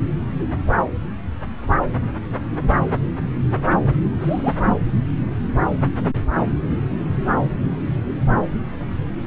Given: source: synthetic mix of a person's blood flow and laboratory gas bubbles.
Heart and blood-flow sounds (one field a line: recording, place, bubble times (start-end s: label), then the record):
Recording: Doppler ultrasound of blood flow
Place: subclavian vein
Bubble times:
4.21-4.54 s: bubbles
From the record:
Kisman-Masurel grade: 111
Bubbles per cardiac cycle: 1 to 2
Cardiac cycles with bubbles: 1 to 10%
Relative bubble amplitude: barely perceptible (0.100 to 0.250)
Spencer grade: 1 (occasional bubble signal discernible with the cardiac motion signal, with majority of cardiac periods free of bubbles)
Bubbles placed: anywhere in the cardiac cycle